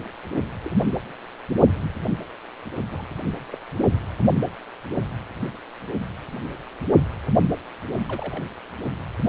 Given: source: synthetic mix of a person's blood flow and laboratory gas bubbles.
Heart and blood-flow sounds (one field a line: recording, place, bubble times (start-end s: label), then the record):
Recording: Doppler ultrasound of blood flow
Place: precordium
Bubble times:
0.64-0.71 s: bubbles
0.82-0.95 s: bubbles
2.92-3.06 s: bubbles
3.53-3.58 s: bubbles
8.09-8.45 s: bubbles
From the record:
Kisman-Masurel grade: 121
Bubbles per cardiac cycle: 1 to 2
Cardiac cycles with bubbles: 10 to 50%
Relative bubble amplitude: barely perceptible (0.100 to 0.250)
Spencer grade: 2 (many but less than half of the cardiac periods contain bubble signals, singularly or in groups)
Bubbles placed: only in the low amplitude regions of the cardiac cycle